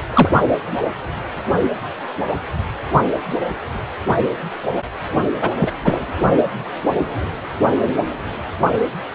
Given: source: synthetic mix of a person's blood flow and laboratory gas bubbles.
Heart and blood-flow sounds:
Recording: Doppler ultrasound of blood flow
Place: precordium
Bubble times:
0.14-0.31 s: bubbles
5.41-5.50 s: bubbles
5.60-5.72 s: bubbles
5.84-6.00 s: bubbles
From the record:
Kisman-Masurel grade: 223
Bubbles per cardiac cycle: several, 3 to 8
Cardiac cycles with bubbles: 10 to 50%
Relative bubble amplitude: loud (0.450 to 0.775)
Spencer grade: 2 (many but less than half of the cardiac periods contain bubble signals, singularly or in groups)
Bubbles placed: only in the low amplitude regions of the cardiac cycle

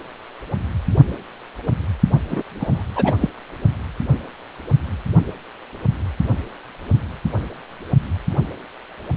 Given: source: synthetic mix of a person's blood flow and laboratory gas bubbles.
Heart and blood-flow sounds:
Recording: Doppler ultrasound of blood flow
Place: precordium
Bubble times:
2.30-2.42 s: bubbles
2.60-2.83 s: bubbles
2.96-3.15 s: bubbles
3.21-3.30 s: bubbles
From the record:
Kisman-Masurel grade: 212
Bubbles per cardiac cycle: several, 3 to 8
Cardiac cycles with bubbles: 1 to 10%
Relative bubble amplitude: moderate (0.250 to 0.450)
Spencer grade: 1 (occasional bubble signal discernible with the cardiac motion signal, with majority of cardiac periods free of bubbles)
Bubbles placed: only in the low amplitude regions of the cardiac cycle

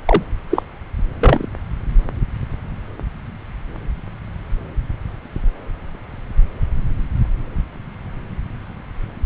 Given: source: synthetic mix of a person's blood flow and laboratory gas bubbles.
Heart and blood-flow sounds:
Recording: Doppler ultrasound of blood flow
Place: subclavian vein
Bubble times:
0.06-0.22 s: bubbles
0.49-0.62 s: bubbles
1.21-1.46 s: bubbles
From the record:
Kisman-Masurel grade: 223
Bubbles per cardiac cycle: several, 3 to 8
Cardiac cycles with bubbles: 10 to 50%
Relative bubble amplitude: loud (0.450 to 0.775)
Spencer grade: 2 (many but less than half of the cardiac periods contain bubble signals, singularly or in groups)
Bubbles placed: anywhere in the cardiac cycle

